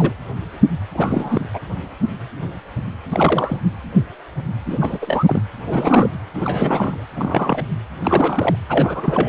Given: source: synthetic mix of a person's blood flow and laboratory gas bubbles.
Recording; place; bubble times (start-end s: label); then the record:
Doppler ultrasound of blood flow; precordium
0.00-0.13 s: bubbles
0.94-1.49 s: bubbles
1.54-1.60 s: bubbles
3.08-3.59 s: bubbles
4.66-4.78 s: bubbles
4.80-5.24 s: bubbles
5.26-5.42 s: bubbles
5.57-6.09 s: bubbles
6.34-7.04 s: bubbles
7.16-7.62 s: bubbles
8.03-8.56 s: bubbles
8.69-9.29 s: bubbles
From the record:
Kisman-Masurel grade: 332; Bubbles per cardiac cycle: rolling drumbeat, 9 or more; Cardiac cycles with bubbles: 50 to 99%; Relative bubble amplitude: moderate (0.250 to 0.450); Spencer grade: 3 (all of the cardiac periods contain showers or single bubble signals, but not dominating or overriding the cardiac motion signals); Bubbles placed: anywhere in the cardiac cycle